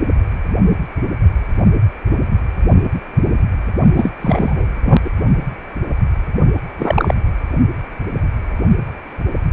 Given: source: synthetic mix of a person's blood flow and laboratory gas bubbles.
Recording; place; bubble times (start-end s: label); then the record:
Doppler ultrasound of blood flow; precordium
3.96-4.10 s: bubbles
4.21-4.66 s: bubbles
4.83-5.00 s: bubbles
5.04-5.10 s: bubbles
6.76-7.14 s: bubbles
From the record:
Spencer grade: 2 (many but less than half of the cardiac periods contain bubble signals, singularly or in groups); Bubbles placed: only in the low amplitude regions of the cardiac cycle